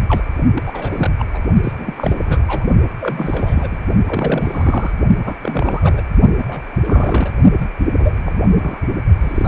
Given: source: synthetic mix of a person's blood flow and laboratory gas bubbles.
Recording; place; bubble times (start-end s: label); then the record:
Doppler ultrasound of blood flow; precordium
0.00-0.02 s: bubbles
0.08-0.23 s: bubbles
0.53-1.11 s: bubbles
1.18-1.24 s: bubbles
1.34-1.39 s: bubbles
1.64-1.72 s: bubbles
1.79-1.94 s: bubbles
1.98-2.42 s: bubbles
2.48-2.66 s: bubbles
3.00-3.78 s: bubbles
4.08-4.94 s: bubbles
5.24-5.37 s: bubbles
5.42-6.01 s: bubbles
6.38-6.44 s: bubbles
6.47-6.63 s: bubbles
6.83-7.32 s: bubbles
7.56-7.70 s: bubbles
7.77-7.88 s: bubbles
7.98-8.21 s: bubbles
8.25-8.32 s: bubbles
8.37-8.48 s: bubbles
8.56-8.80 s: bubbles
9.21-9.48 s: bubbles
From the record:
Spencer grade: 3 (all of the cardiac periods contain showers or single bubble signals, but not dominating or overriding the cardiac motion signals); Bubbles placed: only in the low amplitude regions of the cardiac cycle